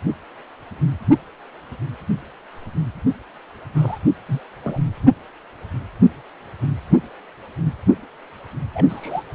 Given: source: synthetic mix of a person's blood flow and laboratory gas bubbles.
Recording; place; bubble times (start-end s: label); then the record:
Doppler ultrasound of blood flow; precordium
3.75-3.99 s: bubbles
4.26-4.41 s: bubbles
4.63-4.78 s: bubbles
8.74-9.23 s: bubbles
From the record:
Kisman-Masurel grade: 121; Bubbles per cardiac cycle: 1 to 2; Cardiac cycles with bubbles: 10 to 50%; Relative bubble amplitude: barely perceptible (0.100 to 0.250); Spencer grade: 2 (many but less than half of the cardiac periods contain bubble signals, singularly or in groups); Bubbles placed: only in the low amplitude regions of the cardiac cycle